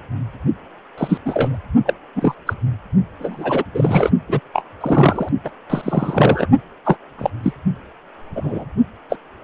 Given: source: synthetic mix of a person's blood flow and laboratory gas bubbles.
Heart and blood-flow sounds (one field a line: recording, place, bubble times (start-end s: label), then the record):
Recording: Doppler ultrasound of blood flow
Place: precordium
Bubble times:
0.97-1.17 s: bubbles
1.25-1.58 s: bubbles
1.85-1.94 s: bubbles
2.15-2.34 s: bubbles
2.46-2.53 s: bubbles
3.19-3.63 s: bubbles
3.74-4.10 s: bubbles
4.29-4.40 s: bubbles
4.54-4.62 s: bubbles
4.80-5.29 s: bubbles
5.44-5.51 s: bubbles
5.70-6.47 s: bubbles
6.85-6.98 s: bubbles
7.19-7.30 s: bubbles
7.44-7.53 s: bubbles
8.35-8.65 s: bubbles
9.09-9.17 s: bubbles
From the record:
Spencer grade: 3 (all of the cardiac periods contain showers or single bubble signals, but not dominating or overriding the cardiac motion signals)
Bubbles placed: only in the low amplitude regions of the cardiac cycle